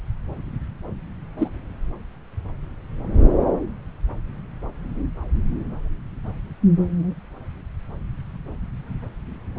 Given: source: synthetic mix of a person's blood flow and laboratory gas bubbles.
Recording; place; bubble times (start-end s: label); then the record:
Doppler ultrasound of blood flow; subclavian vein
1.38-1.48 s: bubbles
From the record:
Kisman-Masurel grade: 112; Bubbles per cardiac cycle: 1 to 2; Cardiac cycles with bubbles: 1 to 10%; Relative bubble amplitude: moderate (0.250 to 0.450); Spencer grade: 1 (occasional bubble signal discernible with the cardiac motion signal, with majority of cardiac periods free of bubbles); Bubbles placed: anywhere in the cardiac cycle